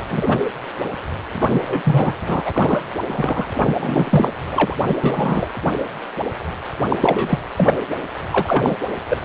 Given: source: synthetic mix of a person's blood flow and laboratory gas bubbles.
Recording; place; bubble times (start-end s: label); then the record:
Doppler ultrasound of blood flow; precordium
0.00-0.03 s: bubbles
0.10-0.37 s: bubbles
1.32-2.15 s: bubbles
2.21-2.83 s: bubbles
3.10-3.49 s: bubbles
3.58-4.32 s: bubbles
4.51-4.76 s: bubbles
4.89-4.95 s: bubbles
5.04-5.50 s: bubbles
6.88-6.97 s: bubbles
7.00-7.39 s: bubbles
7.56-7.73 s: bubbles
8.30-8.75 s: bubbles
9.09-9.17 s: bubbles
From the record:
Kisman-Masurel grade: 333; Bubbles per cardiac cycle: rolling drumbeat, 9 or more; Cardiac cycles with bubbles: 50 to 99%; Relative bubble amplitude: loud (0.450 to 0.775); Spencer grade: 3 (all of the cardiac periods contain showers or single bubble signals, but not dominating or overriding the cardiac motion signals); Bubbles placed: anywhere in the cardiac cycle